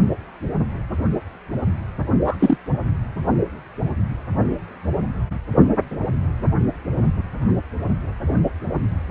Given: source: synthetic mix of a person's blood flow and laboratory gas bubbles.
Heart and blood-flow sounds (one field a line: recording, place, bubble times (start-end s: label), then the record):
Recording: Doppler ultrasound of blood flow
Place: precordium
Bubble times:
2.24-2.37 s: bubbles
2.39-2.58 s: bubbles
From the record:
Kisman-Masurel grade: 113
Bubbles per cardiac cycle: 1 to 2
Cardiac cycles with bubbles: 1 to 10%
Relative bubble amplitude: loud (0.450 to 0.775)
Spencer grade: 1 (occasional bubble signal discernible with the cardiac motion signal, with majority of cardiac periods free of bubbles)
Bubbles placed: anywhere in the cardiac cycle